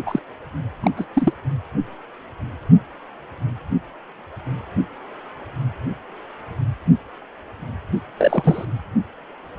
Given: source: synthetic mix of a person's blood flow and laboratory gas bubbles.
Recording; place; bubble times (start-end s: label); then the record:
Doppler ultrasound of blood flow; precordium
0.05-0.20 s: bubbles
0.83-0.91 s: bubbles
0.97-1.06 s: bubbles
1.14-1.33 s: bubbles
8.17-8.65 s: bubbles
From the record:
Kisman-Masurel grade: 222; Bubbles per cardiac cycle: several, 3 to 8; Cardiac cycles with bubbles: 10 to 50%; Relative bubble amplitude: moderate (0.250 to 0.450); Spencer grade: 2 (many but less than half of the cardiac periods contain bubble signals, singularly or in groups); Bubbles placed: only in the low amplitude regions of the cardiac cycle